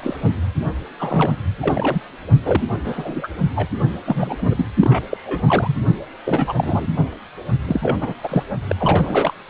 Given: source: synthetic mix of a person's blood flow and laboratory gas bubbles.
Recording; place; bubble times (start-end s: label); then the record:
Doppler ultrasound of blood flow; precordium
0.00-0.17 s: bubbles
0.22-0.33 s: bubbles
0.99-1.36 s: bubbles
1.61-2.00 s: bubbles
2.45-2.62 s: bubbles
2.85-3.27 s: bubbles
3.56-3.67 s: bubbles
4.04-4.66 s: bubbles
4.80-5.03 s: bubbles
5.11-5.79 s: bubbles
6.25-6.53 s: bubbles
6.56-6.88 s: bubbles
7.68-7.98 s: bubbles
8.00-8.13 s: bubbles
8.23-8.43 s: bubbles
8.67-8.75 s: bubbles
8.78-9.33 s: bubbles
From the record:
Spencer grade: 3 (all of the cardiac periods contain showers or single bubble signals, but not dominating or overriding the cardiac motion signals); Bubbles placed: only in the low amplitude regions of the cardiac cycle